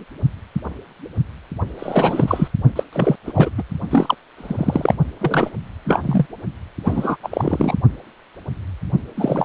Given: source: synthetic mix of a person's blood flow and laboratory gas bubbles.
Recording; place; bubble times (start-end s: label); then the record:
Doppler ultrasound of blood flow; precordium
1.79-2.48 s: bubbles
2.75-2.83 s: bubbles
2.93-3.16 s: bubbles
3.27-3.50 s: bubbles
3.58-3.63 s: bubbles
3.91-4.15 s: bubbles
4.37-4.95 s: bubbles
5.20-5.50 s: bubbles
5.84-6.26 s: bubbles
6.84-7.17 s: bubbles
7.23-7.76 s: bubbles
9.16-9.44 s: bubbles
From the record:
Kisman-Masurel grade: 233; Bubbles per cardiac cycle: several, 3 to 8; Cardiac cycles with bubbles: 50 to 99%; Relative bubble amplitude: loud (0.450 to 0.775); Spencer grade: 3 (all of the cardiac periods contain showers or single bubble signals, but not dominating or overriding the cardiac motion signals); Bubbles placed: only in the low amplitude regions of the cardiac cycle